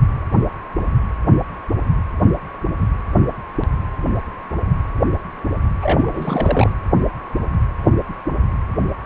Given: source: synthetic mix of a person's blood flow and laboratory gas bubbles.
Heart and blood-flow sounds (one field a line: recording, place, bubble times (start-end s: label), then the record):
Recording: Doppler ultrasound of blood flow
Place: precordium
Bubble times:
5.81-6.72 s: bubbles
From the record:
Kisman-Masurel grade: 212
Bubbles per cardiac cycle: several, 3 to 8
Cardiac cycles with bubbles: 1 to 10%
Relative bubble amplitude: moderate (0.250 to 0.450)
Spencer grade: 1 (occasional bubble signal discernible with the cardiac motion signal, with majority of cardiac periods free of bubbles)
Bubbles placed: anywhere in the cardiac cycle